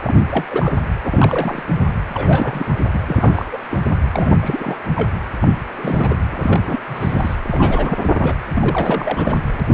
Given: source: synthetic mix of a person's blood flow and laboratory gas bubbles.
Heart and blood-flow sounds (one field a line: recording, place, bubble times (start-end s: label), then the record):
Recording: Doppler ultrasound of blood flow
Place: precordium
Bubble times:
0.03-0.14 s: bubbles
0.30-0.45 s: bubbles
0.50-0.79 s: bubbles
1.03-1.63 s: bubbles
2.07-2.75 s: bubbles
2.91-3.45 s: bubbles
3.52-3.57 s: bubbles
3.71-3.79 s: bubbles
4.14-4.35 s: bubbles
4.40-4.77 s: bubbles
4.95-5.15 s: bubbles
5.41-5.48 s: bubbles
5.77-6.18 s: bubbles
6.31-6.79 s: bubbles
6.88-7.36 s: bubbles
7.43-8.34 s: bubbles
8.54-9.36 s: bubbles
9.71-9.74 s: bubbles
From the record:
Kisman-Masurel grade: 342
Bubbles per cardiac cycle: rolling drumbeat, 9 or more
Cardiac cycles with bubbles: 100%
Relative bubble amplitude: moderate (0.250 to 0.450)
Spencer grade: 3 (all of the cardiac periods contain showers or single bubble signals, but not dominating or overriding the cardiac motion signals)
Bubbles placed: anywhere in the cardiac cycle